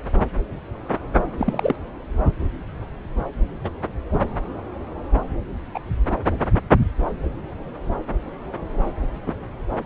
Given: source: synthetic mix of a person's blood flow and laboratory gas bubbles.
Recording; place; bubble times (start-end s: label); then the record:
Doppler ultrasound of blood flow; subclavian vein
1.37-1.75 s: bubbles
3.64-3.71 s: bubbles
4.12-4.18 s: bubbles
5.74-5.79 s: bubbles
9.26-9.33 s: bubbles
From the record:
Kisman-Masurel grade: 122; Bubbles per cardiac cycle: 1 to 2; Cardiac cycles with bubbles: 10 to 50%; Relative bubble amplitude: moderate (0.250 to 0.450); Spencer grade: 2 (many but less than half of the cardiac periods contain bubble signals, singularly or in groups); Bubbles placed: anywhere in the cardiac cycle